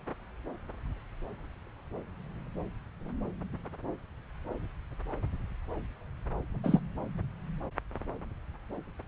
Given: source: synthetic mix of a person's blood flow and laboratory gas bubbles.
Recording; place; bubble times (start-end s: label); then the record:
Doppler ultrasound of blood flow; subclavian vein
6.64-6.79 s: bubbles
From the record:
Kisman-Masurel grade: 113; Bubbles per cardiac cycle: 1 to 2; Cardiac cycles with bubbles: 1 to 10%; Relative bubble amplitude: loud (0.450 to 0.775); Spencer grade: 1 (occasional bubble signal discernible with the cardiac motion signal, with majority of cardiac periods free of bubbles); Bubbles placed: anywhere in the cardiac cycle